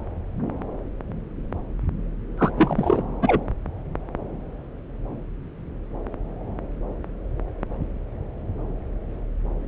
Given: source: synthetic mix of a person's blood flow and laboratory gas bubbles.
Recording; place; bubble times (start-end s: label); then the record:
Doppler ultrasound of blood flow; subclavian vein
2.38-2.50 s: bubbles
2.56-3.02 s: bubbles
3.22-3.44 s: bubbles
From the record:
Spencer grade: 1 (occasional bubble signal discernible with the cardiac motion signal, with majority of cardiac periods free of bubbles); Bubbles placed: anywhere in the cardiac cycle